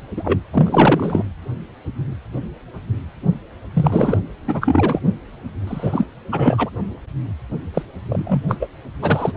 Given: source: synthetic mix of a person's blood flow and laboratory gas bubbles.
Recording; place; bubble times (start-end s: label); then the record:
Doppler ultrasound of blood flow; precordium
0.16-0.40 s: bubbles
0.53-1.23 s: bubbles
3.75-4.20 s: bubbles
4.47-5.00 s: bubbles
5.67-6.05 s: bubbles
6.32-6.70 s: bubbles
7.74-7.83 s: bubbles
8.09-8.41 s: bubbles
8.48-8.57 s: bubbles
8.60-8.70 s: bubbles
9.01-9.32 s: bubbles
From the record:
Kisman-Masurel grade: 233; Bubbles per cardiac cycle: several, 3 to 8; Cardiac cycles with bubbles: 50 to 99%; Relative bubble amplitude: loud (0.450 to 0.775); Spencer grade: 3 (all of the cardiac periods contain showers or single bubble signals, but not dominating or overriding the cardiac motion signals); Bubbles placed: anywhere in the cardiac cycle